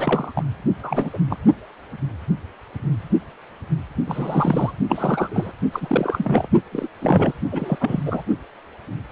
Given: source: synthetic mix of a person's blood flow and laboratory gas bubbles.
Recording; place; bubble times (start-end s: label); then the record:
Doppler ultrasound of blood flow; precordium
0.00-0.32 s: bubbles
0.35-0.44 s: bubbles
0.83-1.10 s: bubbles
1.13-1.18 s: bubbles
1.30-1.36 s: bubbles
4.07-4.72 s: bubbles
4.89-5.53 s: bubbles
5.73-6.47 s: bubbles
6.72-6.88 s: bubbles
7.01-7.35 s: bubbles
7.51-8.02 s: bubbles
8.05-8.21 s: bubbles
From the record:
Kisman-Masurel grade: 332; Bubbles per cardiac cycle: rolling drumbeat, 9 or more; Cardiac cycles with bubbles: 50 to 99%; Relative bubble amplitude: moderate (0.250 to 0.450); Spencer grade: 3 (all of the cardiac periods contain showers or single bubble signals, but not dominating or overriding the cardiac motion signals); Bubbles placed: only in the low amplitude regions of the cardiac cycle